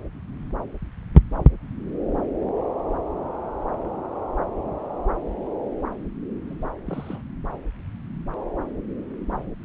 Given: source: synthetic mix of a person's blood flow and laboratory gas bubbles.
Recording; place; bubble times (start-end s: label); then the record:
Doppler ultrasound of blood flow; subclavian vein
6.48-6.69 s: bubbles
6.86-7.22 s: bubbles
From the record:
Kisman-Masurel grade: 221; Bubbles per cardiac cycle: several, 3 to 8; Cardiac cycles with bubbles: 10 to 50%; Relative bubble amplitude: barely perceptible (0.100 to 0.250); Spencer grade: 2 (many but less than half of the cardiac periods contain bubble signals, singularly or in groups); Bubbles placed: anywhere in the cardiac cycle